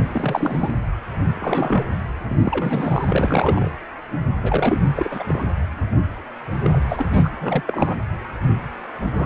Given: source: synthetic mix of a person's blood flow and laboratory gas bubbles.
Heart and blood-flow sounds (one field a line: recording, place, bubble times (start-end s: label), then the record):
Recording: Doppler ultrasound of blood flow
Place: precordium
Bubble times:
0.00-0.09 s: bubbles
0.12-0.72 s: bubbles
1.35-1.84 s: bubbles
2.18-2.36 s: bubbles
2.40-3.71 s: bubbles
4.42-4.80 s: bubbles
4.96-5.23 s: bubbles
5.27-5.45 s: bubbles
6.64-7.06 s: bubbles
7.11-7.30 s: bubbles
7.36-7.62 s: bubbles
7.65-7.95 s: bubbles
9.12-9.26 s: bubbles
From the record:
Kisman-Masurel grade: 332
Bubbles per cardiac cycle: rolling drumbeat, 9 or more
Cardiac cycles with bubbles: 50 to 99%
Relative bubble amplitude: moderate (0.250 to 0.450)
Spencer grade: 3 (all of the cardiac periods contain showers or single bubble signals, but not dominating or overriding the cardiac motion signals)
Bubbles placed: anywhere in the cardiac cycle